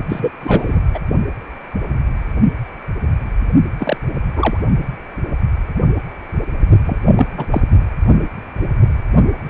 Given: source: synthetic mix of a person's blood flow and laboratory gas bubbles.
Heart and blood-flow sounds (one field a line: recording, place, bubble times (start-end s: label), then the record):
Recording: Doppler ultrasound of blood flow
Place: precordium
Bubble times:
0.09-0.32 s: bubbles
0.40-0.80 s: bubbles
0.93-0.99 s: bubbles
3.79-3.97 s: bubbles
4.35-4.57 s: bubbles
6.85-6.97 s: bubbles
7.05-7.26 s: bubbles
7.37-7.46 s: bubbles
7.50-7.62 s: bubbles
From the record:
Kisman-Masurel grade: 223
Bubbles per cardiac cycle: several, 3 to 8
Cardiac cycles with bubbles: 10 to 50%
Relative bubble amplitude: loud (0.450 to 0.775)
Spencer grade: 2 (many but less than half of the cardiac periods contain bubble signals, singularly or in groups)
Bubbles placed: only in the low amplitude regions of the cardiac cycle